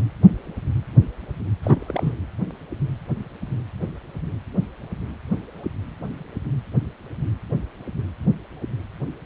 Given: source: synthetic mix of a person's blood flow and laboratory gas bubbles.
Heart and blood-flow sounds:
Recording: Doppler ultrasound of blood flow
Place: precordium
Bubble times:
1.63-2.14 s: bubbles
From the record:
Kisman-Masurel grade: 211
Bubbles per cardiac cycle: several, 3 to 8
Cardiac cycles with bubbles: 1 to 10%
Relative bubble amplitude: barely perceptible (0.100 to 0.250)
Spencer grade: 1 (occasional bubble signal discernible with the cardiac motion signal, with majority of cardiac periods free of bubbles)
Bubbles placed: anywhere in the cardiac cycle

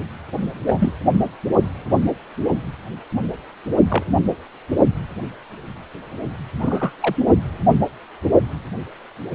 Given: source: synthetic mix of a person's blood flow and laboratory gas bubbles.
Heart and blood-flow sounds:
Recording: Doppler ultrasound of blood flow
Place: precordium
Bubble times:
0.66-0.94 s: bubbles
3.90-4.03 s: bubbles
6.59-6.92 s: bubbles
7.00-7.15 s: bubbles
From the record:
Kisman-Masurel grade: 122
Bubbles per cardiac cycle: 1 to 2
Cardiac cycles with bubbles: 10 to 50%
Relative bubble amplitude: moderate (0.250 to 0.450)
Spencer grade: 2 (many but less than half of the cardiac periods contain bubble signals, singularly or in groups)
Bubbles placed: only in the low amplitude regions of the cardiac cycle

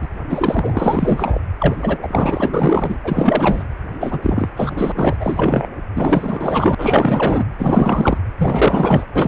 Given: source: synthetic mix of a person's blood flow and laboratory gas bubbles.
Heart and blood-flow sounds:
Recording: Doppler ultrasound of blood flow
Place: precordium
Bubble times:
0.00-0.08 s: bubbles
0.29-1.39 s: bubbles
1.59-1.98 s: bubbles
2.02-2.50 s: bubbles
2.54-2.98 s: bubbles
3.04-3.64 s: bubbles
4.00-4.19 s: bubbles
4.22-4.48 s: bubbles
4.56-4.92 s: bubbles
4.96-5.17 s: bubbles
5.19-5.67 s: bubbles
5.95-6.75 s: bubbles
6.77-7.46 s: bubbles
7.58-8.17 s: bubbles
8.38-9.05 s: bubbles
9.13-9.28 s: bubbles
From the record:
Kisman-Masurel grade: 444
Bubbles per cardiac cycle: continuous sound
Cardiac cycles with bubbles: 100%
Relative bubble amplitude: maximal (0.775 to 0.999)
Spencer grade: 4 (maximum detectable bubble signal sounding continuously throughout systole and diastole of every cardiac period, and overriding the amplitude of the normal cardiac signals)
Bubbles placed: anywhere in the cardiac cycle

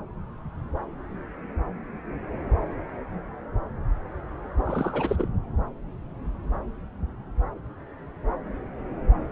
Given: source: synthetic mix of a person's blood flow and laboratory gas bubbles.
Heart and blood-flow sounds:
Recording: Doppler ultrasound of blood flow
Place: subclavian vein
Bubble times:
4.65-5.28 s: bubbles
From the record:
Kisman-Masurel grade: 211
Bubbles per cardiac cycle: several, 3 to 8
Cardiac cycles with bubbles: 1 to 10%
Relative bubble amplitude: barely perceptible (0.100 to 0.250)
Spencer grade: 1 (occasional bubble signal discernible with the cardiac motion signal, with majority of cardiac periods free of bubbles)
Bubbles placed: anywhere in the cardiac cycle

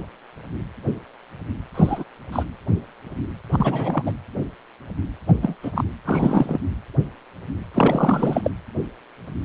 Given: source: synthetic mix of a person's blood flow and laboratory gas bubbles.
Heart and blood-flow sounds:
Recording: Doppler ultrasound of blood flow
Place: precordium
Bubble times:
1.74-2.04 s: bubbles
2.32-2.43 s: bubbles
3.52-4.12 s: bubbles
5.28-5.33 s: bubbles
5.42-5.55 s: bubbles
5.63-5.71 s: bubbles
5.75-5.84 s: bubbles
6.06-6.58 s: bubbles
7.74-8.51 s: bubbles
From the record:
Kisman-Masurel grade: 232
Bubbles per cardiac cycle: several, 3 to 8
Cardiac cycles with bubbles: 50 to 99%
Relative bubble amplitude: moderate (0.250 to 0.450)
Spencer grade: 3 (all of the cardiac periods contain showers or single bubble signals, but not dominating or overriding the cardiac motion signals)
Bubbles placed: anywhere in the cardiac cycle

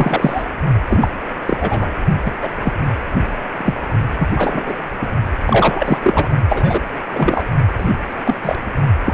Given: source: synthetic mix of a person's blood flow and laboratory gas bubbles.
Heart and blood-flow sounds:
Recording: Doppler ultrasound of blood flow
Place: precordium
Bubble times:
0.00-0.43 s: bubbles
0.88-1.11 s: bubbles
1.46-1.93 s: bubbles
2.25-2.30 s: bubbles
2.41-2.49 s: bubbles
2.62-2.72 s: bubbles
3.57-3.74 s: bubbles
4.19-4.28 s: bubbles
4.36-4.74 s: bubbles
5.01-5.09 s: bubbles
5.46-5.99 s: bubbles
6.03-6.29 s: bubbles
6.49-6.81 s: bubbles
7.15-7.45 s: bubbles
7.78-7.91 s: bubbles
8.07-8.55 s: bubbles
9.04-9.14 s: bubbles
From the record:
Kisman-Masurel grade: 233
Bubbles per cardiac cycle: several, 3 to 8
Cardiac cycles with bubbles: 50 to 99%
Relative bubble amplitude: loud (0.450 to 0.775)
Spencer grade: 3 (all of the cardiac periods contain showers or single bubble signals, but not dominating or overriding the cardiac motion signals)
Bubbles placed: only in the low amplitude regions of the cardiac cycle

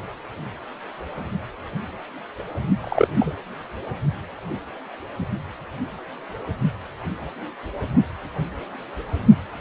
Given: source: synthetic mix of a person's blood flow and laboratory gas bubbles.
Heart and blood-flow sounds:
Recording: Doppler ultrasound of blood flow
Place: precordium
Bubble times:
2.83-3.08 s: bubbles
3.15-3.35 s: bubbles
From the record:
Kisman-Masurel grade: 112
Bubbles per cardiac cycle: 1 to 2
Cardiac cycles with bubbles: 1 to 10%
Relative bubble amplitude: moderate (0.250 to 0.450)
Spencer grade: 1 (occasional bubble signal discernible with the cardiac motion signal, with majority of cardiac periods free of bubbles)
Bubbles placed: only in the low amplitude regions of the cardiac cycle

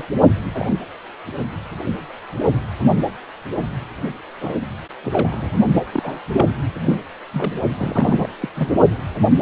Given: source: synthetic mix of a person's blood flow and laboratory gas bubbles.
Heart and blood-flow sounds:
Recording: Doppler ultrasound of blood flow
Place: precordium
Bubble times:
0.00-0.05 s: bubbles
0.54-0.67 s: bubbles
0.70-0.78 s: bubbles
4.39-4.60 s: bubbles
5.03-5.53 s: bubbles
5.73-5.82 s: bubbles
5.93-6.19 s: bubbles
6.32-6.46 s: bubbles
6.84-7.01 s: bubbles
7.32-7.53 s: bubbles
7.77-8.28 s: bubbles
8.41-8.50 s: bubbles
8.55-8.74 s: bubbles
From the record:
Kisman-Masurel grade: 232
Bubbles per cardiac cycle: several, 3 to 8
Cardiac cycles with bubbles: 50 to 99%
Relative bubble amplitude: moderate (0.250 to 0.450)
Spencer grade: 3 (all of the cardiac periods contain showers or single bubble signals, but not dominating or overriding the cardiac motion signals)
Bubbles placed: only in the low amplitude regions of the cardiac cycle

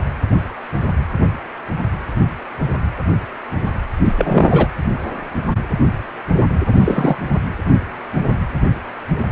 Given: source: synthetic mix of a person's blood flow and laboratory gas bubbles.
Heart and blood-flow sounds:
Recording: Doppler ultrasound of blood flow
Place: precordium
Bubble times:
4.05-4.13 s: bubbles
4.17-4.68 s: bubbles
6.79-7.17 s: bubbles
From the record:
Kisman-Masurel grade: 223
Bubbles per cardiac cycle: several, 3 to 8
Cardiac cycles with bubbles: 10 to 50%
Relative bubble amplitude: loud (0.450 to 0.775)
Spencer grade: 2 (many but less than half of the cardiac periods contain bubble signals, singularly or in groups)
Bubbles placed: anywhere in the cardiac cycle

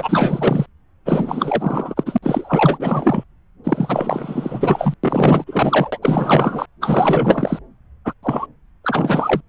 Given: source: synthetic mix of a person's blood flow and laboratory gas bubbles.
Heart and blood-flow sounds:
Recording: Doppler ultrasound of blood flow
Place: subclavian vein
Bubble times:
0.00-0.66 s: bubbles
1.06-2.18 s: bubbles
2.23-3.23 s: bubbles
3.64-4.94 s: bubbles
5.04-5.44 s: bubbles
5.46-5.99 s: bubbles
6.02-6.66 s: bubbles
6.80-7.59 s: bubbles
8.04-8.13 s: bubbles
8.22-8.46 s: bubbles
8.84-9.42 s: bubbles
From the record:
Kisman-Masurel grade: 444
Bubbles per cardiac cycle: continuous sound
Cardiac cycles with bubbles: 100%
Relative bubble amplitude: maximal (0.775 to 0.999)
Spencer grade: 4 (maximum detectable bubble signal sounding continuously throughout systole and diastole of every cardiac period, and overriding the amplitude of the normal cardiac signals)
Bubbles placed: anywhere in the cardiac cycle

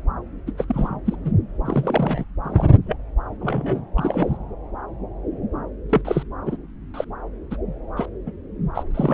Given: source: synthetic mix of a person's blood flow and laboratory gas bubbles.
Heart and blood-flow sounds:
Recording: Doppler ultrasound of blood flow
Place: subclavian vein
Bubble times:
0.46-0.51 s: bubbles
0.57-0.64 s: bubbles
0.68-0.99 s: bubbles
1.05-1.15 s: bubbles
1.25-1.31 s: bubbles
1.65-2.25 s: bubbles
2.43-2.67 s: bubbles
2.86-2.96 s: bubbles
3.40-3.83 s: bubbles
3.95-4.37 s: bubbles
5.89-6.01 s: bubbles
6.04-6.23 s: bubbles
6.46-6.56 s: bubbles
6.93-7.04 s: bubbles
7.50-7.56 s: bubbles
7.97-8.06 s: bubbles
8.26-8.32 s: bubbles
8.75-8.84 s: bubbles
8.91-9.14 s: bubbles
From the record:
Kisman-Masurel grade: 232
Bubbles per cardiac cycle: several, 3 to 8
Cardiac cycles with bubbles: 50 to 99%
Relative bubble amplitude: moderate (0.250 to 0.450)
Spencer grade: 3 (all of the cardiac periods contain showers or single bubble signals, but not dominating or overriding the cardiac motion signals)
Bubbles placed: anywhere in the cardiac cycle

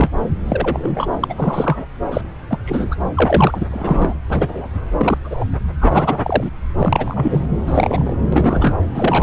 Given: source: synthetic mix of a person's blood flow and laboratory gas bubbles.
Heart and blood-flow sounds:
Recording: Doppler ultrasound of blood flow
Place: subclavian vein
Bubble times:
0.00-0.11 s: bubbles
0.48-1.07 s: bubbles
1.21-1.34 s: bubbles
1.36-1.86 s: bubbles
2.11-2.21 s: bubbles
2.49-2.58 s: bubbles
2.65-2.95 s: bubbles
3.14-3.65 s: bubbles
3.71-4.14 s: bubbles
4.29-4.67 s: bubbles
5.00-5.17 s: bubbles
5.24-5.45 s: bubbles
5.80-6.50 s: bubbles
6.79-7.46 s: bubbles
7.67-8.14 s: bubbles
8.32-8.77 s: bubbles
8.95-9.23 s: bubbles
From the record:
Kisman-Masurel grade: 243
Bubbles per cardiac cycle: several, 3 to 8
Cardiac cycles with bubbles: 100%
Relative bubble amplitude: loud (0.450 to 0.775)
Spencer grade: 3 (all of the cardiac periods contain showers or single bubble signals, but not dominating or overriding the cardiac motion signals)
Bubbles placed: anywhere in the cardiac cycle

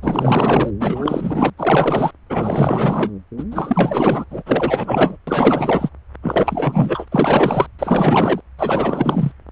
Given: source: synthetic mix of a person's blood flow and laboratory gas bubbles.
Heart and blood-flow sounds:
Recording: Doppler ultrasound of blood flow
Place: subclavian vein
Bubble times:
0.02-0.70 s: bubbles
0.79-1.50 s: bubbles
1.57-2.11 s: bubbles
2.29-3.12 s: bubbles
3.38-3.44 s: bubbles
3.50-4.24 s: bubbles
4.30-4.42 s: bubbles
4.46-5.17 s: bubbles
5.27-5.89 s: bubbles
6.22-7.08 s: bubbles
7.11-7.67 s: bubbles
7.78-8.40 s: bubbles
8.57-9.32 s: bubbles
From the record:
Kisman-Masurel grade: 444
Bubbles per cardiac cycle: continuous sound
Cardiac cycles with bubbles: 100%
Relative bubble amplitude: maximal (0.775 to 0.999)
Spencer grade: 4 (maximum detectable bubble signal sounding continuously throughout systole and diastole of every cardiac period, and overriding the amplitude of the normal cardiac signals)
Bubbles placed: anywhere in the cardiac cycle

